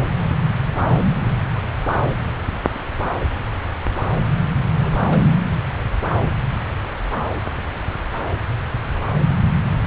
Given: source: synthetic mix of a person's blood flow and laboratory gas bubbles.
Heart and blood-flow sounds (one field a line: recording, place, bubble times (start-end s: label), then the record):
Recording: Doppler ultrasound of blood flow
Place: subclavian vein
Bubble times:
4.79-5.28 s: bubbles
From the record:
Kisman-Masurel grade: 211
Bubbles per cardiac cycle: several, 3 to 8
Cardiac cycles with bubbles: 1 to 10%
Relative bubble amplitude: barely perceptible (0.100 to 0.250)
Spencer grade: 1 (occasional bubble signal discernible with the cardiac motion signal, with majority of cardiac periods free of bubbles)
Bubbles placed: anywhere in the cardiac cycle